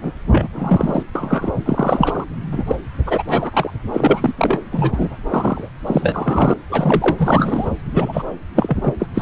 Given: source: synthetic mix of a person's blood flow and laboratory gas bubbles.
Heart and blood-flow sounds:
Doppler ultrasound of blood flow; subclavian vein
0.01-0.13 s: bubbles
0.32-0.49 s: bubbles
0.53-1.02 s: bubbles
1.15-1.51 s: bubbles
1.65-2.25 s: bubbles
2.51-2.76 s: bubbles
3.06-3.23 s: bubbles
3.29-3.51 s: bubbles
3.53-3.71 s: bubbles
3.93-4.33 s: bubbles
4.38-4.59 s: bubbles
4.71-5.17 s: bubbles
5.29-5.69 s: bubbles
5.87-6.54 s: bubbles
6.70-7.69 s: bubbles
7.93-8.22 s: bubbles
8.55-8.93 s: bubbles
8.99-9.06 s: bubbles
9.14-9.22 s: bubbles
From the record:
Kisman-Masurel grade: 243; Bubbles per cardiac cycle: several, 3 to 8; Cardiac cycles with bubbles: 100%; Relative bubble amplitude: loud (0.450 to 0.775); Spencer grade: 3 (all of the cardiac periods contain showers or single bubble signals, but not dominating or overriding the cardiac motion signals); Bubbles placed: anywhere in the cardiac cycle

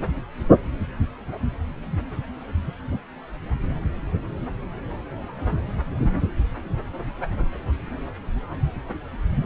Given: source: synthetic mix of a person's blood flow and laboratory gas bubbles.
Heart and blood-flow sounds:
Doppler ultrasound of blood flow; subclavian vein
no bubbles
From the record:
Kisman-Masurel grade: 000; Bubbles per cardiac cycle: 0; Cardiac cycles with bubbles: 0%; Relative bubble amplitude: no bubbles discernible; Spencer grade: 0 (complete lack of bubble signals)

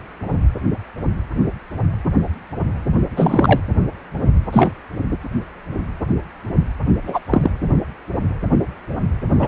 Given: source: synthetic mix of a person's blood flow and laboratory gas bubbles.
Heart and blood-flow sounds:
Doppler ultrasound of blood flow; precordium
3.16-3.60 s: bubbles
4.52-4.72 s: bubbles
7.07-7.19 s: bubbles
7.30-7.51 s: bubbles
9.38-9.48 s: bubbles
From the record:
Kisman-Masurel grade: 223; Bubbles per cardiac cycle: several, 3 to 8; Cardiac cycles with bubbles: 10 to 50%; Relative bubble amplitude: loud (0.450 to 0.775); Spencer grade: 2 (many but less than half of the cardiac periods contain bubble signals, singularly or in groups); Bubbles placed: anywhere in the cardiac cycle

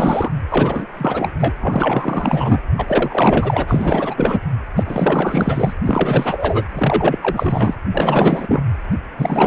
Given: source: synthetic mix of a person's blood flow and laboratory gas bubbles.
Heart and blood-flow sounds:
Doppler ultrasound of blood flow; precordium
0.00-0.32 s: bubbles
0.50-0.86 s: bubbles
0.97-1.30 s: bubbles
1.40-1.53 s: bubbles
1.60-2.61 s: bubbles
2.77-4.40 s: bubbles
4.76-5.73 s: bubbles
5.85-6.65 s: bubbles
6.74-7.76 s: bubbles
7.93-8.63 s: bubbles
9.18-9.47 s: bubbles
From the record:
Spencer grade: 4 (maximum detectable bubble signal sounding continuously throughout systole and diastole of every cardiac period, and overriding the amplitude of the normal cardiac signals); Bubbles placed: anywhere in the cardiac cycle

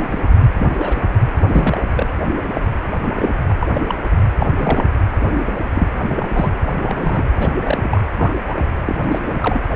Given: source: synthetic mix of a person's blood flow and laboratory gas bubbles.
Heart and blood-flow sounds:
Doppler ultrasound of blood flow; precordium
0.00-0.19 s: bubbles
0.58-0.67 s: bubbles
0.77-0.96 s: bubbles
1.47-1.81 s: bubbles
1.94-2.08 s: bubbles
2.54-2.61 s: bubbles
3.16-3.34 s: bubbles
3.50-3.54 s: bubbles
3.60-3.67 s: bubbles
3.75-3.95 s: bubbles
4.40-4.49 s: bubbles
4.59-4.84 s: bubbles
5.25-5.58 s: bubbles
5.74-5.86 s: bubbles
6.00-6.28 s: bubbles
6.32-6.52 s: bubbles
6.83-7.27 s: bubbles
7.39-7.52 s: bubbles
7.61-8.01 s: bubbles
8.17-8.31 s: bubbles
8.47-8.66 s: bubbles
8.87-9.19 s: bubbles
9.24-9.60 s: bubbles
From the record:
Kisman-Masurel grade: 242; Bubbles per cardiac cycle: several, 3 to 8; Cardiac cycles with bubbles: 100%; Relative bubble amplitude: moderate (0.250 to 0.450); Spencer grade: 3 (all of the cardiac periods contain showers or single bubble signals, but not dominating or overriding the cardiac motion signals); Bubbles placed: anywhere in the cardiac cycle

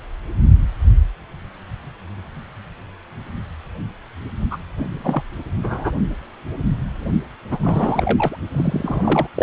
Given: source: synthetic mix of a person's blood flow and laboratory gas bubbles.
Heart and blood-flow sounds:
Doppler ultrasound of blood flow; precordium
4.51-4.57 s: bubbles
4.78-5.25 s: bubbles
5.63-5.92 s: bubbles
7.51-7.59 s: bubbles
7.62-8.37 s: bubbles
8.54-9.27 s: bubbles
9.35-9.43 s: bubbles
From the record:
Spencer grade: 2 (many but less than half of the cardiac periods contain bubble signals, singularly or in groups); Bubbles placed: only in the low amplitude regions of the cardiac cycle

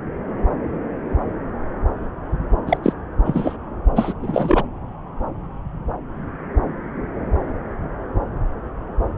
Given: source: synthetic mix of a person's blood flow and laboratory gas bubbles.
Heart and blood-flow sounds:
Doppler ultrasound of blood flow; subclavian vein
2.67-2.78 s: bubbles
2.83-2.93 s: bubbles
3.25-3.56 s: bubbles
3.96-4.13 s: bubbles
4.22-4.63 s: bubbles
From the record:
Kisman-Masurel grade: 223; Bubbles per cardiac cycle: several, 3 to 8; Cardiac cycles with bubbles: 10 to 50%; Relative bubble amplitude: loud (0.450 to 0.775); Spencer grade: 2 (many but less than half of the cardiac periods contain bubble signals, singularly or in groups); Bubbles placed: anywhere in the cardiac cycle

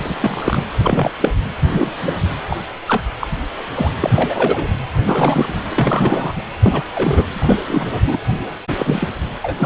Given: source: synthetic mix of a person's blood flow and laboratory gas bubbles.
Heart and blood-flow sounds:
Doppler ultrasound of blood flow; precordium
0.01-0.63 s: bubbles
0.83-1.10 s: bubbles
1.21-1.32 s: bubbles
1.72-1.92 s: bubbles
2.02-2.11 s: bubbles
2.49-2.56 s: bubbles
2.88-3.03 s: bubbles
3.20-3.27 s: bubbles
3.75-3.94 s: bubbles
4.01-4.67 s: bubbles
5.07-5.56 s: bubbles
5.70-6.33 s: bubbles
6.36-6.42 s: bubbles
6.63-6.83 s: bubbles
6.95-7.23 s: bubbles
7.34-7.57 s: bubbles
7.67-7.89 s: bubbles
8.07-8.18 s: bubbles
8.79-9.08 s: bubbles
9.42-9.66 s: bubbles
From the record:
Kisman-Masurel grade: 243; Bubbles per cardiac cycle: several, 3 to 8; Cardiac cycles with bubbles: 100%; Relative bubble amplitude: loud (0.450 to 0.775); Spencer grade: 3 (all of the cardiac periods contain showers or single bubble signals, but not dominating or overriding the cardiac motion signals); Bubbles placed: anywhere in the cardiac cycle

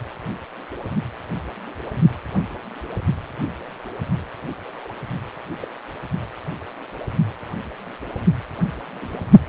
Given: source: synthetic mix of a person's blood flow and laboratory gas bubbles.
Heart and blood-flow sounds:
Doppler ultrasound of blood flow; precordium
4.53-4.59 s: bubbles
4.65-4.93 s: bubbles
5.62-5.68 s: bubbles
8.95-9.25 s: bubbles
From the record:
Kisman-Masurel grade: 121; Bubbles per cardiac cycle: 1 to 2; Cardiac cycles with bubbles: 10 to 50%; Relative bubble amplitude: barely perceptible (0.100 to 0.250); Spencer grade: 2 (many but less than half of the cardiac periods contain bubble signals, singularly or in groups); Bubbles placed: anywhere in the cardiac cycle

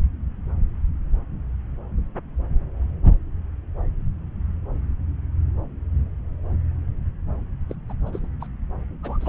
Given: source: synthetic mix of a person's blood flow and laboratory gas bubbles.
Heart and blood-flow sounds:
Doppler ultrasound of blood flow; subclavian vein
7.69-7.75 s: bubbles
7.88-7.93 s: bubbles
8.06-8.10 s: bubbles
8.12-8.19 s: bubbles
8.22-8.27 s: bubbles
8.40-8.46 s: bubbles
9.03-9.28 s: bubbles
From the record:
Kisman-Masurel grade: 221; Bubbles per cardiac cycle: several, 3 to 8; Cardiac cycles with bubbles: 10 to 50%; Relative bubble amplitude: barely perceptible (0.100 to 0.250); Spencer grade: 2 (many but less than half of the cardiac periods contain bubble signals, singularly or in groups); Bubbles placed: anywhere in the cardiac cycle

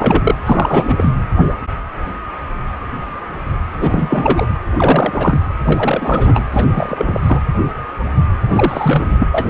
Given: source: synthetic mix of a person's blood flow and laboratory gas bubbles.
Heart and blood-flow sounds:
Doppler ultrasound of blood flow; precordium
0.00-0.35 s: bubbles
0.45-1.10 s: bubbles
3.75-4.47 s: bubbles
4.76-5.39 s: bubbles
5.64-6.43 s: bubbles
6.52-6.71 s: bubbles
6.74-7.41 s: bubbles
8.46-9.14 s: bubbles
9.18-9.27 s: bubbles
9.31-9.50 s: bubbles
From the record:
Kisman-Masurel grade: 333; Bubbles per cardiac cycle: rolling drumbeat, 9 or more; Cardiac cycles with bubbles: 50 to 99%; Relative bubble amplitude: loud (0.450 to 0.775); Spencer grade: 3 (all of the cardiac periods contain showers or single bubble signals, but not dominating or overriding the cardiac motion signals); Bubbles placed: anywhere in the cardiac cycle

